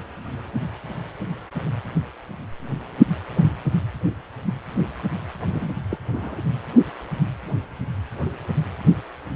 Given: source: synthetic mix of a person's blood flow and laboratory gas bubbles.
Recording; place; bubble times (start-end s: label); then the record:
Doppler ultrasound of blood flow; precordium
5.53-5.71 s: bubbles
5.90-5.97 s: bubbles
6.12-6.42 s: bubbles
From the record:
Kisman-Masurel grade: 211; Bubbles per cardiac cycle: several, 3 to 8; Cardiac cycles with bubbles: 1 to 10%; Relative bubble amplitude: barely perceptible (0.100 to 0.250); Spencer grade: 1 (occasional bubble signal discernible with the cardiac motion signal, with majority of cardiac periods free of bubbles); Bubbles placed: anywhere in the cardiac cycle